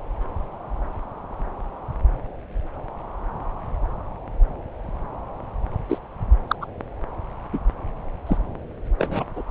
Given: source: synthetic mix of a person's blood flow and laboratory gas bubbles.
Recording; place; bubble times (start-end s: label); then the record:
Doppler ultrasound of blood flow; subclavian vein
5.89-5.99 s: bubbles
6.48-6.56 s: bubbles
6.61-6.66 s: bubbles
7.53-7.59 s: bubbles
8.27-8.38 s: bubbles
8.99-9.25 s: bubbles
9.36-9.42 s: bubbles
From the record:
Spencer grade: 2 (many but less than half of the cardiac periods contain bubble signals, singularly or in groups); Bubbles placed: anywhere in the cardiac cycle